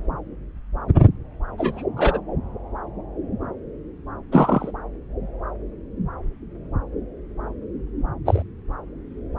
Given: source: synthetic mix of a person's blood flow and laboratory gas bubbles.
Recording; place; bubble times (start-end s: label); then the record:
Doppler ultrasound of blood flow; subclavian vein
1.58-1.83 s: bubbles
1.96-2.20 s: bubbles
4.31-4.71 s: bubbles
8.26-8.43 s: bubbles
From the record:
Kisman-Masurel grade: 123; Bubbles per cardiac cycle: 1 to 2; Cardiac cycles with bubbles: 10 to 50%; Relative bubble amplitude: loud (0.450 to 0.775); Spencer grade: 2 (many but less than half of the cardiac periods contain bubble signals, singularly or in groups); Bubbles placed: anywhere in the cardiac cycle